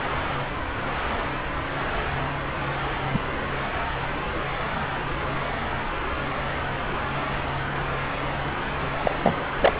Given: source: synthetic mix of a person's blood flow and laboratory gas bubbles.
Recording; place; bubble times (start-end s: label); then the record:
Doppler ultrasound of blood flow; subclavian vein
3.13-3.19 s: bubbles
9.02-9.15 s: bubbles
9.23-9.44 s: bubbles
9.56-9.80 s: bubbles
From the record:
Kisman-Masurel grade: 123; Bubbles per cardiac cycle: 1 to 2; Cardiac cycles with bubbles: 10 to 50%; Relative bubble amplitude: loud (0.450 to 0.775); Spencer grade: 2 (many but less than half of the cardiac periods contain bubble signals, singularly or in groups); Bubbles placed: anywhere in the cardiac cycle